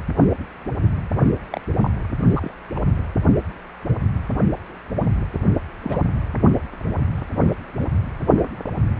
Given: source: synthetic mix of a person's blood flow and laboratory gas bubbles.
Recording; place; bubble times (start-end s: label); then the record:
Doppler ultrasound of blood flow; precordium
1.50-1.61 s: bubbles
1.82-1.91 s: bubbles
2.30-2.54 s: bubbles
2.75-2.79 s: bubbles
5.83-6.01 s: bubbles
From the record:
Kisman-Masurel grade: 121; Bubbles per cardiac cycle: 1 to 2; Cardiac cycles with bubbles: 10 to 50%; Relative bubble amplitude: barely perceptible (0.100 to 0.250); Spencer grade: 2 (many but less than half of the cardiac periods contain bubble signals, singularly or in groups); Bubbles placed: anywhere in the cardiac cycle